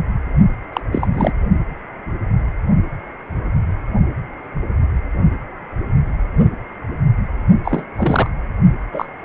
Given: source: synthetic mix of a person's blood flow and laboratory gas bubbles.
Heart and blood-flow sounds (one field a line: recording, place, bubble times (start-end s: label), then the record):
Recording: Doppler ultrasound of blood flow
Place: precordium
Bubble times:
0.73-0.80 s: bubbles
0.92-1.08 s: bubbles
1.14-1.31 s: bubbles
7.64-7.84 s: bubbles
7.97-8.28 s: bubbles
8.92-9.05 s: bubbles
From the record:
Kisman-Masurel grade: 223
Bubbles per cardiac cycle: several, 3 to 8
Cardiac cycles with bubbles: 10 to 50%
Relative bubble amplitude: loud (0.450 to 0.775)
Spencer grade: 2 (many but less than half of the cardiac periods contain bubble signals, singularly or in groups)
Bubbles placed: only in the low amplitude regions of the cardiac cycle